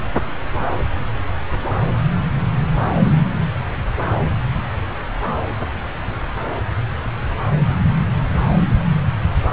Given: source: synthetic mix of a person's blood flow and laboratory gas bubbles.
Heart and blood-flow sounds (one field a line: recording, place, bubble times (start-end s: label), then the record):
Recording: Doppler ultrasound of blood flow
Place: subclavian vein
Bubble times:
no bubbles
From the record:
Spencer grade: 0 (complete lack of bubble signals)